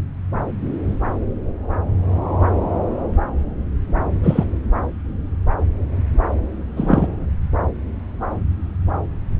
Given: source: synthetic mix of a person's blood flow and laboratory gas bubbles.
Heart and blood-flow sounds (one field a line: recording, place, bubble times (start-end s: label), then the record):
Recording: Doppler ultrasound of blood flow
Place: subclavian vein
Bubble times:
4.23-4.45 s: bubbles
6.76-7.07 s: bubbles
From the record:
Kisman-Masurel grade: 123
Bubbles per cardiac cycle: 1 to 2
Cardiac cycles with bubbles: 10 to 50%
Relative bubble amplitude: loud (0.450 to 0.775)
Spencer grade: 2 (many but less than half of the cardiac periods contain bubble signals, singularly or in groups)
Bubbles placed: anywhere in the cardiac cycle